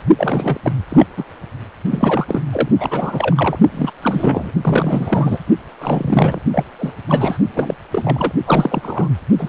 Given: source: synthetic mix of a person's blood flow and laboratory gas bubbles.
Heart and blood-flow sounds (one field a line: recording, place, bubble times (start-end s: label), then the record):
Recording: Doppler ultrasound of blood flow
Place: precordium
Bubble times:
0.18-0.72 s: bubbles
0.89-1.06 s: bubbles
1.17-1.25 s: bubbles
1.91-2.42 s: bubbles
2.51-2.68 s: bubbles
2.79-3.58 s: bubbles
3.74-3.91 s: bubbles
4.01-4.52 s: bubbles
4.63-5.38 s: bubbles
5.81-6.40 s: bubbles
6.53-6.64 s: bubbles
6.79-6.94 s: bubbles
7.08-7.38 s: bubbles
7.52-7.78 s: bubbles
7.90-8.31 s: bubbles
8.45-9.08 s: bubbles
9.37-9.49 s: bubbles
From the record:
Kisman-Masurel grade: 343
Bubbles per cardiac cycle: rolling drumbeat, 9 or more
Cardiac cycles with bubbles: 100%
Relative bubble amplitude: loud (0.450 to 0.775)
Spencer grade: 3 (all of the cardiac periods contain showers or single bubble signals, but not dominating or overriding the cardiac motion signals)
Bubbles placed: only in the low amplitude regions of the cardiac cycle